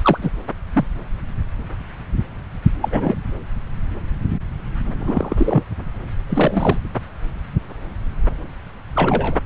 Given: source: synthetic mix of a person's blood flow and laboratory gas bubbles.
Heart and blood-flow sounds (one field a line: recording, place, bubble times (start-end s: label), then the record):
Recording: Doppler ultrasound of blood flow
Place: subclavian vein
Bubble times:
0.02-0.18 s: bubbles
0.21-0.31 s: bubbles
0.73-0.85 s: bubbles
2.81-3.15 s: bubbles
4.98-5.63 s: bubbles
6.29-6.78 s: bubbles
8.93-9.40 s: bubbles
From the record:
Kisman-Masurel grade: 223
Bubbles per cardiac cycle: several, 3 to 8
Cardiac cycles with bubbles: 10 to 50%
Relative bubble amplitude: loud (0.450 to 0.775)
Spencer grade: 2 (many but less than half of the cardiac periods contain bubble signals, singularly or in groups)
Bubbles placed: anywhere in the cardiac cycle